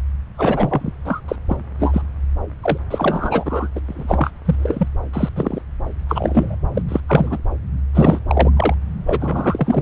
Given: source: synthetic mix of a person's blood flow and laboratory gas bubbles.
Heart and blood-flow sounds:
Doppler ultrasound of blood flow; subclavian vein
0.35-0.92 s: bubbles
1.04-1.20 s: bubbles
1.28-1.36 s: bubbles
1.48-1.56 s: bubbles
1.79-2.02 s: bubbles
2.62-2.78 s: bubbles
2.90-3.69 s: bubbles
3.75-3.80 s: bubbles
3.87-4.31 s: bubbles
4.45-4.88 s: bubbles
5.13-5.29 s: bubbles
5.36-5.62 s: bubbles
6.08-6.56 s: bubbles
6.74-6.82 s: bubbles
6.88-7.01 s: bubbles
7.07-7.38 s: bubbles
7.94-8.19 s: bubbles
8.28-8.50 s: bubbles
8.56-8.74 s: bubbles
9.05-9.82 s: bubbles
From the record:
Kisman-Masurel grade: 243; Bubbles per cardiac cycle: several, 3 to 8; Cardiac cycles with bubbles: 100%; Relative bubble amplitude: loud (0.450 to 0.775); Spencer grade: 3 (all of the cardiac periods contain showers or single bubble signals, but not dominating or overriding the cardiac motion signals); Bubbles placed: anywhere in the cardiac cycle

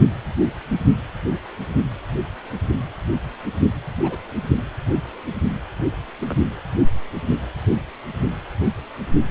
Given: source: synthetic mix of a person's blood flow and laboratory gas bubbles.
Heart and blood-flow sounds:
Doppler ultrasound of blood flow; precordium
4.03-4.17 s: bubbles
6.18-6.39 s: bubbles
From the record:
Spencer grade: 2 (many but less than half of the cardiac periods contain bubble signals, singularly or in groups); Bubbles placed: anywhere in the cardiac cycle

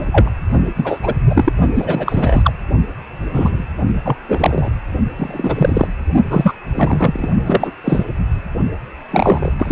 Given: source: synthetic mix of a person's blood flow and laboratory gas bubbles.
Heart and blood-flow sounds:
Doppler ultrasound of blood flow; precordium
0.00-0.07 s: bubbles
0.11-0.30 s: bubbles
0.76-1.14 s: bubbles
1.29-1.52 s: bubbles
1.75-2.53 s: bubbles
3.33-3.66 s: bubbles
4.05-4.17 s: bubbles
4.29-4.69 s: bubbles
5.17-5.88 s: bubbles
6.30-6.54 s: bubbles
6.75-7.29 s: bubbles
7.44-7.72 s: bubbles
7.84-8.05 s: bubbles
9.11-9.52 s: bubbles
9.58-9.72 s: bubbles
From the record:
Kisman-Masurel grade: 243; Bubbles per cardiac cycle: several, 3 to 8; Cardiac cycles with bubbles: 100%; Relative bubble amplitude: loud (0.450 to 0.775); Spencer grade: 3 (all of the cardiac periods contain showers or single bubble signals, but not dominating or overriding the cardiac motion signals); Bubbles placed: only in the low amplitude regions of the cardiac cycle

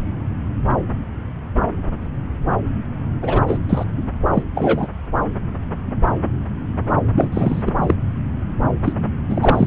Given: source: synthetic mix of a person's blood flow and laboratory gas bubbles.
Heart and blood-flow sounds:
Doppler ultrasound of blood flow; subclavian vein
3.21-3.42 s: bubbles
3.47-3.58 s: bubbles
3.69-3.84 s: bubbles
4.34-4.43 s: bubbles
4.54-4.88 s: bubbles
7.12-7.28 s: bubbles
7.32-7.74 s: bubbles
7.82-7.95 s: bubbles
8.84-8.93 s: bubbles
9.28-9.67 s: bubbles
From the record:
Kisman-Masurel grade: 223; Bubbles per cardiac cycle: several, 3 to 8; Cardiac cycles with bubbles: 10 to 50%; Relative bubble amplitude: loud (0.450 to 0.775); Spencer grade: 2 (many but less than half of the cardiac periods contain bubble signals, singularly or in groups); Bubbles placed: anywhere in the cardiac cycle

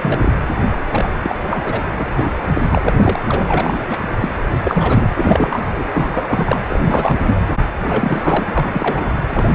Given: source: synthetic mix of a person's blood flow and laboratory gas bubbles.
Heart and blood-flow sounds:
Doppler ultrasound of blood flow; precordium
0.00-0.31 s: bubbles
0.73-0.79 s: bubbles
0.91-1.08 s: bubbles
1.22-1.35 s: bubbles
1.49-1.81 s: bubbles
1.95-2.09 s: bubbles
2.17-2.29 s: bubbles
2.53-3.19 s: bubbles
3.28-3.84 s: bubbles
3.89-3.97 s: bubbles
4.21-4.35 s: bubbles
4.63-5.06 s: bubbles
5.15-5.62 s: bubbles
5.77-5.84 s: bubbles
5.93-6.25 s: bubbles
6.27-6.58 s: bubbles
6.69-7.18 s: bubbles
7.21-7.41 s: bubbles
7.85-9.12 s: bubbles
9.29-9.55 s: bubbles
From the record:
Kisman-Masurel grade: 343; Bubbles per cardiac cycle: rolling drumbeat, 9 or more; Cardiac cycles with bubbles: 100%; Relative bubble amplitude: loud (0.450 to 0.775); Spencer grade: 3 (all of the cardiac periods contain showers or single bubble signals, but not dominating or overriding the cardiac motion signals); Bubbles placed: anywhere in the cardiac cycle

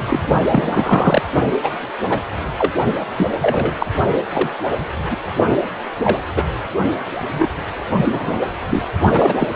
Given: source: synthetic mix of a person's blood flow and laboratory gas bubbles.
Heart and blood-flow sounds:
Doppler ultrasound of blood flow; precordium
0.00-0.24 s: bubbles
0.51-1.22 s: bubbles
1.62-1.71 s: bubbles
2.09-2.19 s: bubbles
2.58-2.73 s: bubbles
3.17-3.27 s: bubbles
3.42-3.86 s: bubbles
4.33-4.50 s: bubbles
4.98-5.19 s: bubbles
5.52-5.57 s: bubbles
6.04-6.18 s: bubbles
6.34-6.43 s: bubbles
7.32-7.47 s: bubbles
7.97-8.05 s: bubbles
8.08-8.39 s: bubbles
8.70-8.82 s: bubbles
9.12-9.35 s: bubbles
9.39-9.47 s: bubbles
From the record:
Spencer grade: 3 (all of the cardiac periods contain showers or single bubble signals, but not dominating or overriding the cardiac motion signals); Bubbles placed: only in the low amplitude regions of the cardiac cycle

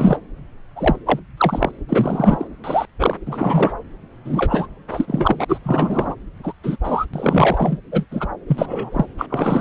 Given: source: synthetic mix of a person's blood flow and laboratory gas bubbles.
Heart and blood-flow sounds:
Doppler ultrasound of blood flow; subclavian vein
0.00-0.17 s: bubbles
0.76-0.96 s: bubbles
1.05-1.20 s: bubbles
1.37-1.72 s: bubbles
1.89-2.48 s: bubbles
2.64-2.86 s: bubbles
2.99-3.17 s: bubbles
3.26-3.71 s: bubbles
4.24-4.67 s: bubbles
4.90-5.45 s: bubbles
5.48-5.59 s: bubbles
5.63-6.15 s: bubbles
6.43-6.52 s: bubbles
6.63-6.76 s: bubbles
6.83-7.05 s: bubbles
7.13-7.77 s: bubbles
7.91-8.05 s: bubbles
8.11-8.28 s: bubbles
8.48-9.06 s: bubbles
9.17-9.26 s: bubbles
9.29-9.61 s: bubbles
From the record:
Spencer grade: 3 (all of the cardiac periods contain showers or single bubble signals, but not dominating or overriding the cardiac motion signals); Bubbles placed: anywhere in the cardiac cycle

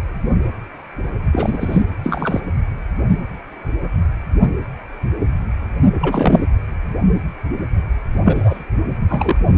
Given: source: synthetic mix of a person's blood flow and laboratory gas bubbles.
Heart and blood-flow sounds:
Doppler ultrasound of blood flow; precordium
1.32-1.82 s: bubbles
2.03-2.40 s: bubbles
6.00-6.46 s: bubbles
8.25-8.63 s: bubbles
9.09-9.38 s: bubbles
From the record:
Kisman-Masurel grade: 223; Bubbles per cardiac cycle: several, 3 to 8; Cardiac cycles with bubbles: 10 to 50%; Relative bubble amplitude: loud (0.450 to 0.775); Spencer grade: 2 (many but less than half of the cardiac periods contain bubble signals, singularly or in groups); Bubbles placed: anywhere in the cardiac cycle

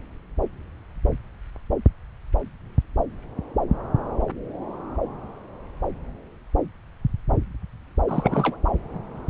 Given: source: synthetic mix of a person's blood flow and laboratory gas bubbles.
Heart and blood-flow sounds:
Doppler ultrasound of blood flow; subclavian vein
8.07-8.57 s: bubbles
From the record:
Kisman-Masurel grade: 212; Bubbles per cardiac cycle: several, 3 to 8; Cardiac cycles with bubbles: 1 to 10%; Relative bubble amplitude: moderate (0.250 to 0.450); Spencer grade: 1 (occasional bubble signal discernible with the cardiac motion signal, with majority of cardiac periods free of bubbles); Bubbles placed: anywhere in the cardiac cycle

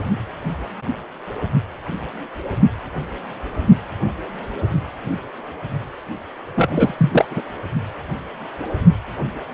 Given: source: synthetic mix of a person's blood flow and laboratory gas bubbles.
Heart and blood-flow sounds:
Doppler ultrasound of blood flow; precordium
6.55-6.94 s: bubbles
6.97-7.25 s: bubbles
7.30-7.41 s: bubbles
From the record:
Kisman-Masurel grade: 213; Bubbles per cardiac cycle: several, 3 to 8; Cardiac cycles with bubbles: 1 to 10%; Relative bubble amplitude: loud (0.450 to 0.775); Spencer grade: 1 (occasional bubble signal discernible with the cardiac motion signal, with majority of cardiac periods free of bubbles); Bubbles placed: anywhere in the cardiac cycle

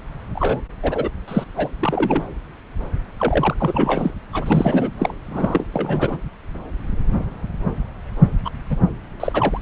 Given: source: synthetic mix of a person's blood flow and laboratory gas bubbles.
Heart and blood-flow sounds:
Doppler ultrasound of blood flow; subclavian vein
0.34-0.61 s: bubbles
0.82-1.09 s: bubbles
1.27-1.45 s: bubbles
1.56-1.68 s: bubbles
1.80-2.24 s: bubbles
3.18-3.55 s: bubbles
3.58-4.13 s: bubbles
4.33-4.90 s: bubbles
4.98-5.14 s: bubbles
5.30-5.66 s: bubbles
5.72-6.18 s: bubbles
8.45-8.50 s: bubbles
8.70-8.77 s: bubbles
9.20-9.60 s: bubbles
From the record:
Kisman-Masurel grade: 332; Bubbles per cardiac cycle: rolling drumbeat, 9 or more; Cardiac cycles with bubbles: 50 to 99%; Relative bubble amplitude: moderate (0.250 to 0.450); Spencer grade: 3 (all of the cardiac periods contain showers or single bubble signals, but not dominating or overriding the cardiac motion signals); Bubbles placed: anywhere in the cardiac cycle

